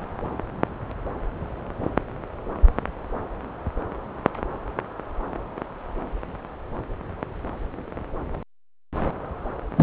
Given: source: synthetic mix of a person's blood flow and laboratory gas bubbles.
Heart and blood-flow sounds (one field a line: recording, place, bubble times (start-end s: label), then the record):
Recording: Doppler ultrasound of blood flow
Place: subclavian vein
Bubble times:
9.77-9.83 s: bubbles
From the record:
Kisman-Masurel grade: 113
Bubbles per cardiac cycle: 1 to 2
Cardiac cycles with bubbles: 1 to 10%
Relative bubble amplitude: loud (0.450 to 0.775)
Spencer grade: 1 (occasional bubble signal discernible with the cardiac motion signal, with majority of cardiac periods free of bubbles)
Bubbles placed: anywhere in the cardiac cycle